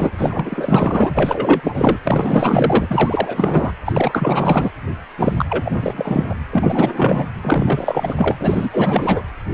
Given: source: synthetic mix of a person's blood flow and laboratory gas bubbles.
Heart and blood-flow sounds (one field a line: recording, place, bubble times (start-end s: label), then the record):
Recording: Doppler ultrasound of blood flow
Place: precordium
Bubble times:
0.00-0.11 s: bubbles
0.17-1.11 s: bubbles
1.14-1.99 s: bubbles
2.04-3.72 s: bubbles
3.85-4.71 s: bubbles
5.18-5.46 s: bubbles
5.50-6.35 s: bubbles
6.50-7.29 s: bubbles
7.42-8.36 s: bubbles
8.39-9.22 s: bubbles
From the record:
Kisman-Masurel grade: 444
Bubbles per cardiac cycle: continuous sound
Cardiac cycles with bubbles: 100%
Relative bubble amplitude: maximal (0.775 to 0.999)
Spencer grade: 4 (maximum detectable bubble signal sounding continuously throughout systole and diastole of every cardiac period, and overriding the amplitude of the normal cardiac signals)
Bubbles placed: anywhere in the cardiac cycle